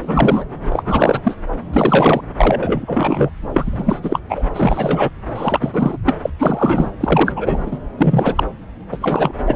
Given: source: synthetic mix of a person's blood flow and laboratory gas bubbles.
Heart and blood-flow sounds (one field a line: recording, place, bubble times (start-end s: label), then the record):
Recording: Doppler ultrasound of blood flow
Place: subclavian vein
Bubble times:
0.00-0.45 s: bubbles
0.69-1.21 s: bubbles
1.23-1.36 s: bubbles
1.73-2.21 s: bubbles
2.38-3.30 s: bubbles
3.54-4.00 s: bubbles
4.03-4.20 s: bubbles
4.29-4.43 s: bubbles
4.53-5.09 s: bubbles
5.34-5.98 s: bubbles
6.06-6.16 s: bubbles
6.23-6.30 s: bubbles
6.39-6.91 s: bubbles
7.00-7.33 s: bubbles
7.36-7.79 s: bubbles
7.97-8.44 s: bubbles
8.92-8.97 s: bubbles
9.01-9.32 s: bubbles
9.46-9.55 s: bubbles
From the record:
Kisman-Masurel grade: 343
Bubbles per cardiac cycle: rolling drumbeat, 9 or more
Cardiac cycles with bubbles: 100%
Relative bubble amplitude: loud (0.450 to 0.775)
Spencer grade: 3 (all of the cardiac periods contain showers or single bubble signals, but not dominating or overriding the cardiac motion signals)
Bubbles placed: anywhere in the cardiac cycle